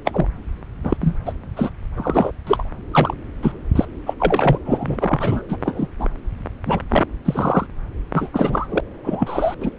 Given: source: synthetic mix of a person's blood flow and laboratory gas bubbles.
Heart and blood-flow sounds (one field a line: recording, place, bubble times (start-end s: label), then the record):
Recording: Doppler ultrasound of blood flow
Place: subclavian vein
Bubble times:
0.05-0.26 s: bubbles
0.84-0.97 s: bubbles
1.00-1.16 s: bubbles
1.25-1.33 s: bubbles
1.56-1.70 s: bubbles
1.96-2.31 s: bubbles
2.46-2.69 s: bubbles
2.92-3.14 s: bubbles
3.42-3.52 s: bubbles
3.75-3.85 s: bubbles
4.06-4.14 s: bubbles
4.20-4.59 s: bubbles
4.65-5.43 s: bubbles
5.49-5.58 s: bubbles
5.64-5.88 s: bubbles
5.99-6.08 s: bubbles
6.66-6.80 s: bubbles
6.90-7.06 s: bubbles
7.25-7.67 s: bubbles
8.13-8.29 s: bubbles
8.33-8.80 s: bubbles
9.04-9.54 s: bubbles
9.61-9.71 s: bubbles
From the record:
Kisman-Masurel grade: 243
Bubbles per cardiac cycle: several, 3 to 8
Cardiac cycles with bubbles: 100%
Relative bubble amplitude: loud (0.450 to 0.775)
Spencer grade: 3 (all of the cardiac periods contain showers or single bubble signals, but not dominating or overriding the cardiac motion signals)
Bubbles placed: anywhere in the cardiac cycle